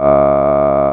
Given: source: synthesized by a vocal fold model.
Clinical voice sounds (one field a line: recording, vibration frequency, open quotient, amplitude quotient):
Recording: sustained vowel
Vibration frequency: 70 Hz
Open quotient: 0.2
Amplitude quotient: 1.2